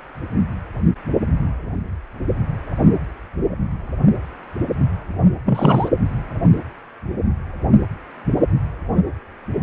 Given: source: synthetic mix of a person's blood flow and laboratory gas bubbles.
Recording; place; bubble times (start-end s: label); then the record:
Doppler ultrasound of blood flow; precordium
5.45-5.88 s: bubbles
From the record:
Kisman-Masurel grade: 213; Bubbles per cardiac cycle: several, 3 to 8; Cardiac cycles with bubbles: 1 to 10%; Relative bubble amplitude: loud (0.450 to 0.775); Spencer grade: 1 (occasional bubble signal discernible with the cardiac motion signal, with majority of cardiac periods free of bubbles); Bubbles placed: anywhere in the cardiac cycle